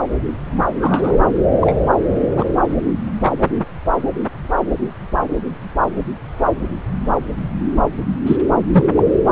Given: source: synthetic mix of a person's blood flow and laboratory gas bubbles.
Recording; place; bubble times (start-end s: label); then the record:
Doppler ultrasound of blood flow; subclavian vein
0.80-1.29 s: bubbles
1.61-1.74 s: bubbles
2.36-2.44 s: bubbles
3.23-3.33 s: bubbles
8.26-8.36 s: bubbles
8.71-8.85 s: bubbles
8.94-9.03 s: bubbles
From the record:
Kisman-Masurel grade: 123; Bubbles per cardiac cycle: 1 to 2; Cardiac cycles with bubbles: 10 to 50%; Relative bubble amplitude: loud (0.450 to 0.775); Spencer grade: 2 (many but less than half of the cardiac periods contain bubble signals, singularly or in groups); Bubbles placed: anywhere in the cardiac cycle